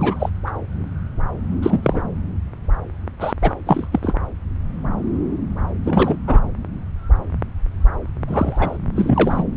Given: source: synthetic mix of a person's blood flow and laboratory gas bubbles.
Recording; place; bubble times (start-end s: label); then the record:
Doppler ultrasound of blood flow; subclavian vein
0.00-0.29 s: bubbles
0.46-0.51 s: bubbles
1.62-2.02 s: bubbles
3.20-3.33 s: bubbles
3.42-3.54 s: bubbles
3.66-3.87 s: bubbles
3.92-3.99 s: bubbles
4.02-4.15 s: bubbles
5.85-6.17 s: bubbles
6.27-6.42 s: bubbles
8.28-8.78 s: bubbles
8.96-9.43 s: bubbles
From the record:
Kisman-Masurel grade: 223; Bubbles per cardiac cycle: several, 3 to 8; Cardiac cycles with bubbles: 10 to 50%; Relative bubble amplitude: loud (0.450 to 0.775); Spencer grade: 2 (many but less than half of the cardiac periods contain bubble signals, singularly or in groups); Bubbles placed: anywhere in the cardiac cycle